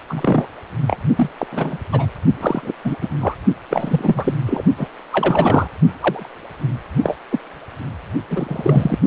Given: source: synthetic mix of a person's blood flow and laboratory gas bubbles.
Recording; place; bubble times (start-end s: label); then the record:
Doppler ultrasound of blood flow; precordium
0.09-0.47 s: bubbles
0.87-0.97 s: bubbles
1.17-1.29 s: bubbles
1.38-1.47 s: bubbles
1.52-1.78 s: bubbles
1.92-2.07 s: bubbles
2.41-2.72 s: bubbles
2.84-2.96 s: bubbles
3.01-3.08 s: bubbles
3.21-3.35 s: bubbles
3.70-4.34 s: bubbles
4.46-4.62 s: bubbles
4.78-4.89 s: bubbles
5.12-5.68 s: bubbles
5.99-6.29 s: bubbles
7.03-7.16 s: bubbles
7.30-7.40 s: bubbles
8.30-8.98 s: bubbles
From the record:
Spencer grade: 3 (all of the cardiac periods contain showers or single bubble signals, but not dominating or overriding the cardiac motion signals); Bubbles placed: only in the low amplitude regions of the cardiac cycle